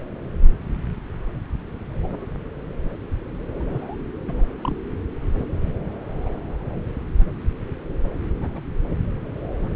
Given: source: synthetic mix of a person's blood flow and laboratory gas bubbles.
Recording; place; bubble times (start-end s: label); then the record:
Doppler ultrasound of blood flow; subclavian vein
2.02-2.25 s: bubbles
3.59-3.63 s: bubbles
3.70-3.96 s: bubbles
4.27-4.42 s: bubbles
4.63-4.76 s: bubbles
5.38-5.46 s: bubbles
6.24-6.33 s: bubbles
8.41-8.61 s: bubbles
From the record:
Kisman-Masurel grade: 121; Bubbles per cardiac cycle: 1 to 2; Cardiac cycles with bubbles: 10 to 50%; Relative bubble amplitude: barely perceptible (0.100 to 0.250); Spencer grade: 2 (many but less than half of the cardiac periods contain bubble signals, singularly or in groups); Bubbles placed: anywhere in the cardiac cycle